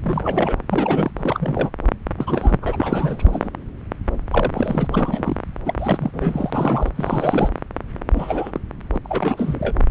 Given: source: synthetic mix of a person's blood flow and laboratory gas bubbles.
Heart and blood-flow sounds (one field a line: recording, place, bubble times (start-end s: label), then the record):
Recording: Doppler ultrasound of blood flow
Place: subclavian vein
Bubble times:
0.03-0.57 s: bubbles
0.70-1.11 s: bubbles
1.20-1.70 s: bubbles
2.18-2.58 s: bubbles
2.61-3.50 s: bubbles
4.30-4.88 s: bubbles
4.91-5.42 s: bubbles
5.66-5.74 s: bubbles
5.79-6.91 s: bubbles
6.96-7.50 s: bubbles
8.14-8.60 s: bubbles
8.94-9.00 s: bubbles
9.04-9.76 s: bubbles
From the record:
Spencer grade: 3 (all of the cardiac periods contain showers or single bubble signals, but not dominating or overriding the cardiac motion signals)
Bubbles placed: anywhere in the cardiac cycle